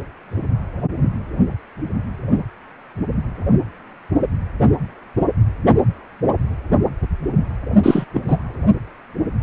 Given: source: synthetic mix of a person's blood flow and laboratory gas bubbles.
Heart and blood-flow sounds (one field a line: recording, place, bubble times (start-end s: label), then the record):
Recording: Doppler ultrasound of blood flow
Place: precordium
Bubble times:
7.83-8.05 s: bubbles
8.14-8.21 s: bubbles
8.27-8.37 s: bubbles
From the record:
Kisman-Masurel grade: 223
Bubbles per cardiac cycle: several, 3 to 8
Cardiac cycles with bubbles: 10 to 50%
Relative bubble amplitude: loud (0.450 to 0.775)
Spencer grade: 2 (many but less than half of the cardiac periods contain bubble signals, singularly or in groups)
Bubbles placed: only in the low amplitude regions of the cardiac cycle